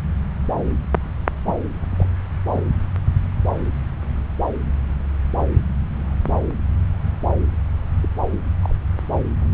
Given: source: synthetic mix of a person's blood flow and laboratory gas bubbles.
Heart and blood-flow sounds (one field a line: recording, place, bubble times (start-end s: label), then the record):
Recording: Doppler ultrasound of blood flow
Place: subclavian vein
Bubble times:
1.45-1.55 s: bubbles
1.97-2.09 s: bubbles
2.53-2.62 s: bubbles
8.03-8.09 s: bubbles
8.62-8.75 s: bubbles
From the record:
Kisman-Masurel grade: 121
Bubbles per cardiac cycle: 1 to 2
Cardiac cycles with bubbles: 10 to 50%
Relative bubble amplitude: barely perceptible (0.100 to 0.250)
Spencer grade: 2 (many but less than half of the cardiac periods contain bubble signals, singularly or in groups)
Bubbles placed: anywhere in the cardiac cycle